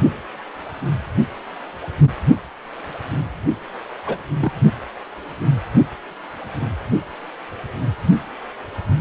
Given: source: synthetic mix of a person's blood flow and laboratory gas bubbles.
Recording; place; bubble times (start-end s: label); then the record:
Doppler ultrasound of blood flow; precordium
4.05-4.17 s: bubbles
4.39-4.52 s: bubbles
From the record:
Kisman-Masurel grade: 112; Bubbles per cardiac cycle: 1 to 2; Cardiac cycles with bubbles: 1 to 10%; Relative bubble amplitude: moderate (0.250 to 0.450); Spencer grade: 1 (occasional bubble signal discernible with the cardiac motion signal, with majority of cardiac periods free of bubbles); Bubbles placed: only in the low amplitude regions of the cardiac cycle